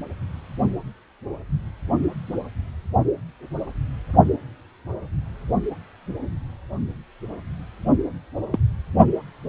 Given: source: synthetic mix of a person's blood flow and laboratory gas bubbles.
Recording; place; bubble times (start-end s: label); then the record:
Doppler ultrasound of blood flow; precordium
8.52-8.59 s: bubbles
From the record:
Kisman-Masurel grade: 112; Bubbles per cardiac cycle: 1 to 2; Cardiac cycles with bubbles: 1 to 10%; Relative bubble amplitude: moderate (0.250 to 0.450); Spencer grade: 1 (occasional bubble signal discernible with the cardiac motion signal, with majority of cardiac periods free of bubbles); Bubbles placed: only in the low amplitude regions of the cardiac cycle